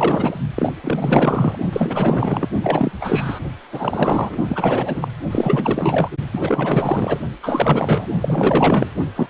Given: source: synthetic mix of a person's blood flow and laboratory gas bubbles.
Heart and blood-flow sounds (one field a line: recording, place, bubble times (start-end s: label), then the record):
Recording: Doppler ultrasound of blood flow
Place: precordium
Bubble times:
0.00-0.39 s: bubbles
0.55-0.72 s: bubbles
0.82-1.57 s: bubbles
1.72-2.49 s: bubbles
2.63-2.92 s: bubbles
3.01-3.40 s: bubbles
3.71-4.36 s: bubbles
4.49-5.08 s: bubbles
5.30-6.08 s: bubbles
6.32-7.18 s: bubbles
7.42-8.07 s: bubbles
8.21-8.91 s: bubbles
9.15-9.30 s: bubbles
From the record:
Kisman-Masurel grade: 444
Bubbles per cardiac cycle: continuous sound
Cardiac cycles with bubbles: 100%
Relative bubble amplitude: maximal (0.775 to 0.999)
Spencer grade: 4 (maximum detectable bubble signal sounding continuously throughout systole and diastole of every cardiac period, and overriding the amplitude of the normal cardiac signals)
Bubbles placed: only in the low amplitude regions of the cardiac cycle